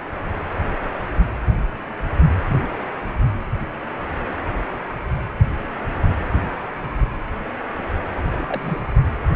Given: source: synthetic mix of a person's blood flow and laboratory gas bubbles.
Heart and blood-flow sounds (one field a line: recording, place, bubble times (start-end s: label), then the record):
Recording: Doppler ultrasound of blood flow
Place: precordium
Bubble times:
8.31-8.45 s: bubbles
8.47-8.88 s: bubbles
From the record:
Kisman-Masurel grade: 211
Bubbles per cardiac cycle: several, 3 to 8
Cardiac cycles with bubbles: 1 to 10%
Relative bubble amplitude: barely perceptible (0.100 to 0.250)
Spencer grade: 1 (occasional bubble signal discernible with the cardiac motion signal, with majority of cardiac periods free of bubbles)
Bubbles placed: anywhere in the cardiac cycle